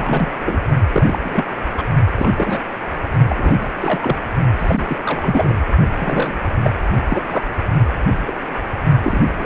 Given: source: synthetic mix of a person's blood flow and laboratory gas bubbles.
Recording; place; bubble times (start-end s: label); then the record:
Doppler ultrasound of blood flow; precordium
0.00-0.32 s: bubbles
0.45-0.59 s: bubbles
0.92-1.19 s: bubbles
1.24-1.46 s: bubbles
1.77-1.83 s: bubbles
2.18-2.59 s: bubbles
3.29-3.67 s: bubbles
3.73-4.17 s: bubbles
4.59-4.96 s: bubbles
5.04-5.54 s: bubbles
5.99-6.39 s: bubbles
6.63-6.71 s: bubbles
7.08-7.22 s: bubbles
7.30-7.44 s: bubbles
8.27-8.35 s: bubbles
9.03-9.23 s: bubbles
9.29-9.46 s: bubbles
From the record:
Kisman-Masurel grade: 232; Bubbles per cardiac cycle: several, 3 to 8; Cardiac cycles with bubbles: 50 to 99%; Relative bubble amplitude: moderate (0.250 to 0.450); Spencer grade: 3 (all of the cardiac periods contain showers or single bubble signals, but not dominating or overriding the cardiac motion signals); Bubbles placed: only in the low amplitude regions of the cardiac cycle